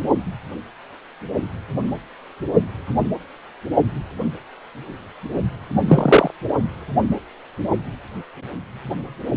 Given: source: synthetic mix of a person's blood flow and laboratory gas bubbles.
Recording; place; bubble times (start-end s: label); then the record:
Doppler ultrasound of blood flow; precordium
5.88-6.31 s: bubbles
6.48-6.53 s: bubbles
From the record:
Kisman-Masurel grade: 223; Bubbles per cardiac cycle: several, 3 to 8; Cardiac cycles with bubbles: 10 to 50%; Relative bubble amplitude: loud (0.450 to 0.775); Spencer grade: 2 (many but less than half of the cardiac periods contain bubble signals, singularly or in groups); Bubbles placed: only in the low amplitude regions of the cardiac cycle